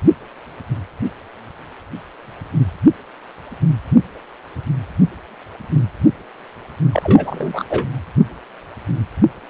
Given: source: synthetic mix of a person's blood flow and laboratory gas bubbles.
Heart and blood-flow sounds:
Doppler ultrasound of blood flow; precordium
6.92-7.64 s: bubbles
7.69-7.86 s: bubbles
From the record:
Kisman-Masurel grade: 213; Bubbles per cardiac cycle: several, 3 to 8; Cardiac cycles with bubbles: 1 to 10%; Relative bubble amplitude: loud (0.450 to 0.775); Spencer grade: 1 (occasional bubble signal discernible with the cardiac motion signal, with majority of cardiac periods free of bubbles); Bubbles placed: anywhere in the cardiac cycle

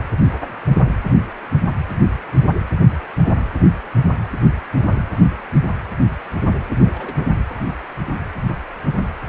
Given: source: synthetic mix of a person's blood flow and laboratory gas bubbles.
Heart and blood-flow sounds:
Doppler ultrasound of blood flow; precordium
6.84-7.16 s: bubbles
From the record:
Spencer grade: 1 (occasional bubble signal discernible with the cardiac motion signal, with majority of cardiac periods free of bubbles); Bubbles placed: anywhere in the cardiac cycle

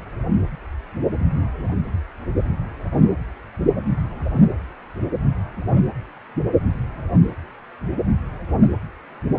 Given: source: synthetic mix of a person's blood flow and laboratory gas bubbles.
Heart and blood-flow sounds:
Doppler ultrasound of blood flow; precordium
no bubbles
From the record:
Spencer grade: 0 (complete lack of bubble signals)

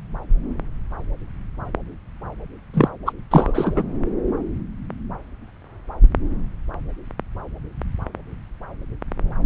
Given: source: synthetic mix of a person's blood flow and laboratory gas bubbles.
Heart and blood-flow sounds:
Doppler ultrasound of blood flow; subclavian vein
2.73-2.89 s: bubbles
3.06-3.12 s: bubbles
3.31-3.83 s: bubbles
From the record:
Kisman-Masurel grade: 213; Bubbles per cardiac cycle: several, 3 to 8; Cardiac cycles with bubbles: 1 to 10%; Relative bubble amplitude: loud (0.450 to 0.775); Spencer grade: 1 (occasional bubble signal discernible with the cardiac motion signal, with majority of cardiac periods free of bubbles); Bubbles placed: anywhere in the cardiac cycle

